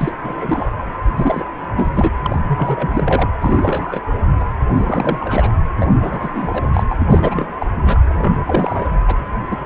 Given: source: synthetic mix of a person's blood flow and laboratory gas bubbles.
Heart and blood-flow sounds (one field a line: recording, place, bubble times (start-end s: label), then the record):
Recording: Doppler ultrasound of blood flow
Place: precordium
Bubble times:
0.00-0.12 s: bubbles
0.24-0.70 s: bubbles
1.02-1.44 s: bubbles
1.76-2.11 s: bubbles
2.22-2.40 s: bubbles
2.47-3.28 s: bubbles
3.41-4.01 s: bubbles
4.39-4.46 s: bubbles
4.75-5.51 s: bubbles
5.76-5.96 s: bubbles
6.00-6.67 s: bubbles
6.73-6.83 s: bubbles
6.89-7.46 s: bubbles
7.60-7.66 s: bubbles
7.86-7.98 s: bubbles
8.09-8.42 s: bubbles
8.46-8.88 s: bubbles
9.07-9.15 s: bubbles
9.50-9.56 s: bubbles
From the record:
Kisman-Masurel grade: 342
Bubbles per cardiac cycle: rolling drumbeat, 9 or more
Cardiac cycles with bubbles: 100%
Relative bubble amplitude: moderate (0.250 to 0.450)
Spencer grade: 3 (all of the cardiac periods contain showers or single bubble signals, but not dominating or overriding the cardiac motion signals)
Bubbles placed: anywhere in the cardiac cycle